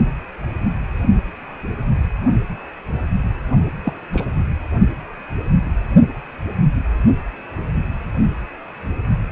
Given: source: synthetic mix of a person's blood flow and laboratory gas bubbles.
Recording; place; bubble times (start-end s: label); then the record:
Doppler ultrasound of blood flow; precordium
3.85-3.93 s: bubbles
4.13-4.25 s: bubbles
From the record:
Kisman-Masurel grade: 112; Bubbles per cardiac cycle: 1 to 2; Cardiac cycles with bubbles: 1 to 10%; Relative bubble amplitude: moderate (0.250 to 0.450); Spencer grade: 1 (occasional bubble signal discernible with the cardiac motion signal, with majority of cardiac periods free of bubbles); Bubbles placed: only in the low amplitude regions of the cardiac cycle